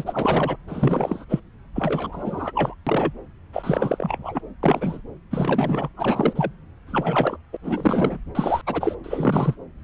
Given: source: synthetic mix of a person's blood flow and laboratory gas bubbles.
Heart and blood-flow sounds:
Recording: Doppler ultrasound of blood flow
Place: subclavian vein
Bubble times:
0.00-0.56 s: bubbles
0.68-1.24 s: bubbles
1.29-1.40 s: bubbles
1.75-2.52 s: bubbles
2.55-2.75 s: bubbles
2.86-3.13 s: bubbles
3.53-4.41 s: bubbles
4.63-5.01 s: bubbles
5.31-5.89 s: bubbles
5.97-6.53 s: bubbles
6.87-7.37 s: bubbles
7.53-7.57 s: bubbles
7.64-8.17 s: bubbles
8.35-8.62 s: bubbles
8.67-8.96 s: bubbles
9.04-9.55 s: bubbles
From the record:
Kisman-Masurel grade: 342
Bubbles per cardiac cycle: rolling drumbeat, 9 or more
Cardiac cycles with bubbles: 100%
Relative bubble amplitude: moderate (0.250 to 0.450)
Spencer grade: 3 (all of the cardiac periods contain showers or single bubble signals, but not dominating or overriding the cardiac motion signals)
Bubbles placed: anywhere in the cardiac cycle

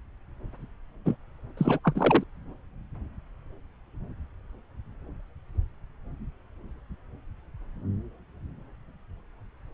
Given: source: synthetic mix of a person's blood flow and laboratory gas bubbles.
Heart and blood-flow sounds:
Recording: Doppler ultrasound of blood flow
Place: subclavian vein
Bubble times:
1.05-1.16 s: bubbles
1.57-1.79 s: bubbles
1.84-2.23 s: bubbles
From the record:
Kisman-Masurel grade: 212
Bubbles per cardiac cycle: several, 3 to 8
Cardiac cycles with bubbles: 1 to 10%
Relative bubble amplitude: moderate (0.250 to 0.450)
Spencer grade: 1 (occasional bubble signal discernible with the cardiac motion signal, with majority of cardiac periods free of bubbles)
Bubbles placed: anywhere in the cardiac cycle

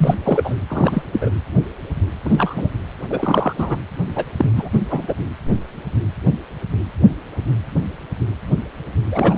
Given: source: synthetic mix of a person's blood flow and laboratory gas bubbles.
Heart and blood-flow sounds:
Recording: Doppler ultrasound of blood flow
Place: precordium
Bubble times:
0.00-0.15 s: bubbles
0.24-0.55 s: bubbles
0.69-1.03 s: bubbles
1.12-1.29 s: bubbles
2.25-2.70 s: bubbles
3.10-3.53 s: bubbles
3.58-3.76 s: bubbles
4.16-4.25 s: bubbles
4.38-4.50 s: bubbles
4.56-4.69 s: bubbles
4.73-4.80 s: bubbles
4.90-5.13 s: bubbles
9.11-9.38 s: bubbles
From the record:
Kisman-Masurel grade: 223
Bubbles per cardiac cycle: several, 3 to 8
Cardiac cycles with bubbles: 10 to 50%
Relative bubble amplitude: loud (0.450 to 0.775)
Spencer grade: 2 (many but less than half of the cardiac periods contain bubble signals, singularly or in groups)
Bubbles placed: anywhere in the cardiac cycle

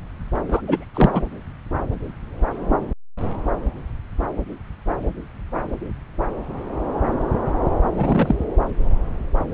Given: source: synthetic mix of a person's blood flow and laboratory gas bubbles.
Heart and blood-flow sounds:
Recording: Doppler ultrasound of blood flow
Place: subclavian vein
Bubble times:
0.48-0.62 s: bubbles
0.66-0.86 s: bubbles
0.94-1.21 s: bubbles
7.95-8.36 s: bubbles
From the record:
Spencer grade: 2 (many but less than half of the cardiac periods contain bubble signals, singularly or in groups)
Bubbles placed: anywhere in the cardiac cycle

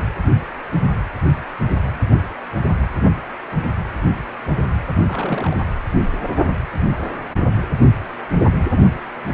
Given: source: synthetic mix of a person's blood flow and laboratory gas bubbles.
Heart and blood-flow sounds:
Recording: Doppler ultrasound of blood flow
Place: precordium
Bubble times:
5.08-5.57 s: bubbles
From the record:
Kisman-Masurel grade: 211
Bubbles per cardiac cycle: several, 3 to 8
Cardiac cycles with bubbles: 1 to 10%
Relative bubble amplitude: barely perceptible (0.100 to 0.250)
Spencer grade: 1 (occasional bubble signal discernible with the cardiac motion signal, with majority of cardiac periods free of bubbles)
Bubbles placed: anywhere in the cardiac cycle

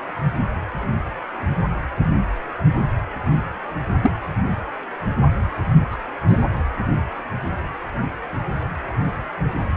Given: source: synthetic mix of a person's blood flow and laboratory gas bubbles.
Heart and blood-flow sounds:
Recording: Doppler ultrasound of blood flow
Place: precordium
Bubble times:
4.01-4.11 s: bubbles
5.90-5.98 s: bubbles
6.28-6.42 s: bubbles
From the record:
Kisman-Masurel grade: 112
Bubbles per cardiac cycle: 1 to 2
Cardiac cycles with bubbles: 1 to 10%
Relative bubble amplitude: moderate (0.250 to 0.450)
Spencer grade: 1 (occasional bubble signal discernible with the cardiac motion signal, with majority of cardiac periods free of bubbles)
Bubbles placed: anywhere in the cardiac cycle

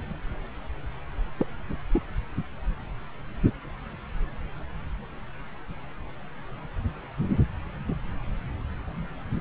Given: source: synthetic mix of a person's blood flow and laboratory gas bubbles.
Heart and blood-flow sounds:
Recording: Doppler ultrasound of blood flow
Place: subclavian vein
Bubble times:
1.38-1.47 s: bubbles
1.93-2.02 s: bubbles
From the record:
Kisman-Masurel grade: 111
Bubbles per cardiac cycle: 1 to 2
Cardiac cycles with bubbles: 1 to 10%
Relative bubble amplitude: barely perceptible (0.100 to 0.250)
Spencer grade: 1 (occasional bubble signal discernible with the cardiac motion signal, with majority of cardiac periods free of bubbles)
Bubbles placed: anywhere in the cardiac cycle

